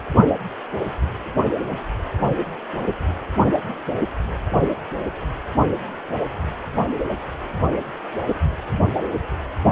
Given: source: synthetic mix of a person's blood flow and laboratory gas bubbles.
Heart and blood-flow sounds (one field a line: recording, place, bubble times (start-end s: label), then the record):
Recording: Doppler ultrasound of blood flow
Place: precordium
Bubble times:
no bubbles
From the record:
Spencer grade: 0 (complete lack of bubble signals)